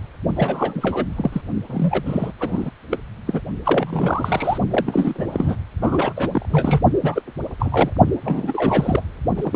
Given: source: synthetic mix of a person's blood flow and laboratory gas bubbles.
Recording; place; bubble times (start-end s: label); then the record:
Doppler ultrasound of blood flow; precordium
0.36-1.06 s: bubbles
1.16-1.42 s: bubbles
1.69-2.32 s: bubbles
2.40-2.71 s: bubbles
2.91-2.98 s: bubbles
3.27-3.41 s: bubbles
3.65-4.58 s: bubbles
4.70-5.56 s: bubbles
5.82-6.13 s: bubbles
6.17-6.47 s: bubbles
6.50-6.82 s: bubbles
7.01-7.22 s: bubbles
7.59-7.90 s: bubbles
8.25-9.02 s: bubbles
9.36-9.56 s: bubbles
From the record:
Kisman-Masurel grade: 342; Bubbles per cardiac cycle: rolling drumbeat, 9 or more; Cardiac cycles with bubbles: 100%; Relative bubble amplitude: moderate (0.250 to 0.450); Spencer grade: 3 (all of the cardiac periods contain showers or single bubble signals, but not dominating or overriding the cardiac motion signals); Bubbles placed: only in the low amplitude regions of the cardiac cycle